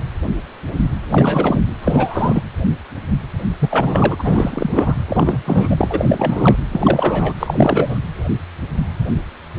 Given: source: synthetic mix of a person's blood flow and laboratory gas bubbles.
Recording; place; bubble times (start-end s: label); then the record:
Doppler ultrasound of blood flow; precordium
1.10-1.59 s: bubbles
1.81-2.42 s: bubbles
3.59-4.16 s: bubbles
4.19-4.95 s: bubbles
5.08-5.39 s: bubbles
5.45-6.56 s: bubbles
6.71-7.33 s: bubbles
7.39-8.01 s: bubbles
From the record:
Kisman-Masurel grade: 333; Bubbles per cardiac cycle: rolling drumbeat, 9 or more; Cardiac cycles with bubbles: 50 to 99%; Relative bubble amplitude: loud (0.450 to 0.775); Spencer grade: 3 (all of the cardiac periods contain showers or single bubble signals, but not dominating or overriding the cardiac motion signals); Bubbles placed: anywhere in the cardiac cycle